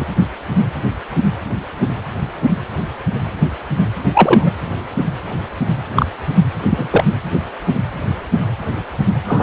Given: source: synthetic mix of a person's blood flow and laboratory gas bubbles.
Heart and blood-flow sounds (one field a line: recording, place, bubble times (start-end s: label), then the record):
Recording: Doppler ultrasound of blood flow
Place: precordium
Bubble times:
0.00-0.04 s: bubbles
4.14-4.52 s: bubbles
5.96-6.06 s: bubbles
6.70-6.88 s: bubbles
6.91-7.04 s: bubbles
9.27-9.43 s: bubbles
From the record:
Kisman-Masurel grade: 123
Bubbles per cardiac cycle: 1 to 2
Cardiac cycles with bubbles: 10 to 50%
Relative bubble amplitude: loud (0.450 to 0.775)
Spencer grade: 2 (many but less than half of the cardiac periods contain bubble signals, singularly or in groups)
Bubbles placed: anywhere in the cardiac cycle